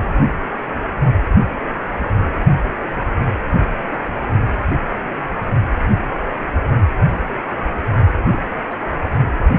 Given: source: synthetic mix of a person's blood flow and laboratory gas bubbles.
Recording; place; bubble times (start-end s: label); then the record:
Doppler ultrasound of blood flow; precordium
3.88-3.96 s: bubbles
8.30-8.38 s: bubbles
8.66-8.74 s: bubbles
From the record:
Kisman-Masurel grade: 121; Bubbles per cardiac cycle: 1 to 2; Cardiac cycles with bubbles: 10 to 50%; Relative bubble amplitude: barely perceptible (0.100 to 0.250); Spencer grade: 2 (many but less than half of the cardiac periods contain bubble signals, singularly or in groups); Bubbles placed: only in the low amplitude regions of the cardiac cycle